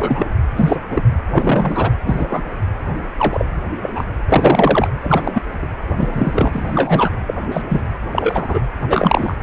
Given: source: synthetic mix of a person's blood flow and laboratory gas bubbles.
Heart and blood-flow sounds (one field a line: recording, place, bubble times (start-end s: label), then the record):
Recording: Doppler ultrasound of blood flow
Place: precordium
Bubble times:
0.00-0.27 s: bubbles
0.56-0.77 s: bubbles
0.90-1.02 s: bubbles
1.31-1.91 s: bubbles
2.06-2.27 s: bubbles
2.29-2.44 s: bubbles
3.18-3.46 s: bubbles
3.81-3.90 s: bubbles
3.95-4.04 s: bubbles
4.29-4.88 s: bubbles
5.02-5.42 s: bubbles
5.62-5.67 s: bubbles
5.97-7.10 s: bubbles
7.26-7.34 s: bubbles
7.51-7.62 s: bubbles
7.69-7.82 s: bubbles
8.11-8.60 s: bubbles
8.80-9.35 s: bubbles
From the record:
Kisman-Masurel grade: 243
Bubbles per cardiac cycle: several, 3 to 8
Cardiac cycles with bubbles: 100%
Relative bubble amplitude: loud (0.450 to 0.775)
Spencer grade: 3 (all of the cardiac periods contain showers or single bubble signals, but not dominating or overriding the cardiac motion signals)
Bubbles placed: anywhere in the cardiac cycle